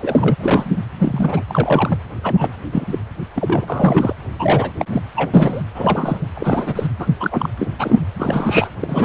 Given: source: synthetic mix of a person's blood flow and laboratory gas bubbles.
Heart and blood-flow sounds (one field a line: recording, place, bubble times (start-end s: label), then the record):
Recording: Doppler ultrasound of blood flow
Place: precordium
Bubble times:
0.01-0.36 s: bubbles
0.40-0.81 s: bubbles
0.99-1.43 s: bubbles
1.48-1.99 s: bubbles
2.23-2.51 s: bubbles
2.71-2.99 s: bubbles
3.35-3.65 s: bubbles
3.68-4.13 s: bubbles
4.38-4.71 s: bubbles
4.79-4.85 s: bubbles
4.89-5.02 s: bubbles
5.15-5.30 s: bubbles
5.34-5.62 s: bubbles
5.74-6.24 s: bubbles
6.35-6.87 s: bubbles
6.99-7.07 s: bubbles
7.20-7.49 s: bubbles
7.59-7.71 s: bubbles
7.79-8.00 s: bubbles
8.16-8.68 s: bubbles
8.79-9.04 s: bubbles
From the record:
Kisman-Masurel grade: 242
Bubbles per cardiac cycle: several, 3 to 8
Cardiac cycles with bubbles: 100%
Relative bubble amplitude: moderate (0.250 to 0.450)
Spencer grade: 3 (all of the cardiac periods contain showers or single bubble signals, but not dominating or overriding the cardiac motion signals)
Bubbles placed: anywhere in the cardiac cycle